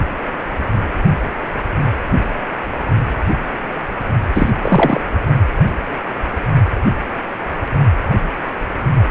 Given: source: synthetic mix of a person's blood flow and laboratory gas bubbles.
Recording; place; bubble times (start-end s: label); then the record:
Doppler ultrasound of blood flow; precordium
4.33-4.50 s: bubbles
4.62-5.01 s: bubbles
From the record:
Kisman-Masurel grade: 213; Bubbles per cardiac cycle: several, 3 to 8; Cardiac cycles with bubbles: 1 to 10%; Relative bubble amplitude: loud (0.450 to 0.775); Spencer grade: 1 (occasional bubble signal discernible with the cardiac motion signal, with majority of cardiac periods free of bubbles); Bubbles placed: only in the low amplitude regions of the cardiac cycle